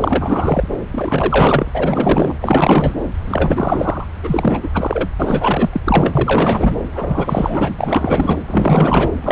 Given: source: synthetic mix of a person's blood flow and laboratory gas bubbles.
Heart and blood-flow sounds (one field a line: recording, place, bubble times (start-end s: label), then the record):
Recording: Doppler ultrasound of blood flow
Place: subclavian vein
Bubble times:
0.00-0.68 s: bubbles
0.92-1.71 s: bubbles
1.74-2.34 s: bubbles
2.40-2.96 s: bubbles
3.27-4.05 s: bubbles
4.22-4.59 s: bubbles
4.62-4.68 s: bubbles
4.74-5.09 s: bubbles
5.18-5.69 s: bubbles
5.72-5.81 s: bubbles
5.84-6.12 s: bubbles
6.15-6.75 s: bubbles
6.93-7.74 s: bubbles
7.79-8.39 s: bubbles
8.46-9.12 s: bubbles
9.21-9.32 s: bubbles
From the record:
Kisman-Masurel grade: 444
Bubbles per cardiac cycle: continuous sound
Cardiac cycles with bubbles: 100%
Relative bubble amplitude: maximal (0.775 to 0.999)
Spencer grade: 4 (maximum detectable bubble signal sounding continuously throughout systole and diastole of every cardiac period, and overriding the amplitude of the normal cardiac signals)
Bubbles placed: anywhere in the cardiac cycle